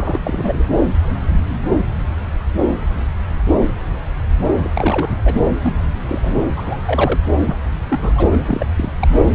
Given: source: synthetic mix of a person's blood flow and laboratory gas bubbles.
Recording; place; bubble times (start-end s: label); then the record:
Doppler ultrasound of blood flow; subclavian vein
0.00-0.64 s: bubbles
4.63-4.70 s: bubbles
4.75-5.17 s: bubbles
5.25-5.42 s: bubbles
5.62-5.75 s: bubbles
6.08-6.42 s: bubbles
6.55-6.80 s: bubbles
6.85-7.20 s: bubbles
7.46-7.56 s: bubbles
7.84-8.40 s: bubbles
8.44-8.66 s: bubbles
8.77-8.91 s: bubbles
8.99-9.08 s: bubbles
9.12-9.24 s: bubbles
From the record:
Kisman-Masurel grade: 232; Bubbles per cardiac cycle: several, 3 to 8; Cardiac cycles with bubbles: 50 to 99%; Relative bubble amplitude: moderate (0.250 to 0.450); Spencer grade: 3 (all of the cardiac periods contain showers or single bubble signals, but not dominating or overriding the cardiac motion signals); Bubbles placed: anywhere in the cardiac cycle